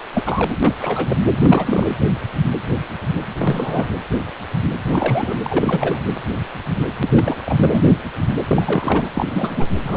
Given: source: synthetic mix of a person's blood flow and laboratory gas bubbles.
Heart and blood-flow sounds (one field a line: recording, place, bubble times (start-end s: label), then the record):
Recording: Doppler ultrasound of blood flow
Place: precordium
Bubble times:
0.13-0.60 s: bubbles
0.62-0.74 s: bubbles
0.79-1.17 s: bubbles
1.41-1.94 s: bubbles
3.27-3.34 s: bubbles
3.38-3.87 s: bubbles
4.88-5.38 s: bubbles
5.43-5.99 s: bubbles
7.01-7.10 s: bubbles
7.16-7.37 s: bubbles
7.46-7.84 s: bubbles
8.48-9.10 s: bubbles
9.13-9.69 s: bubbles
9.84-9.97 s: bubbles
From the record:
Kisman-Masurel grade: 332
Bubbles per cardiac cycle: rolling drumbeat, 9 or more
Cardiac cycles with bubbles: 50 to 99%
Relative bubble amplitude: moderate (0.250 to 0.450)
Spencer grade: 3 (all of the cardiac periods contain showers or single bubble signals, but not dominating or overriding the cardiac motion signals)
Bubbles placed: anywhere in the cardiac cycle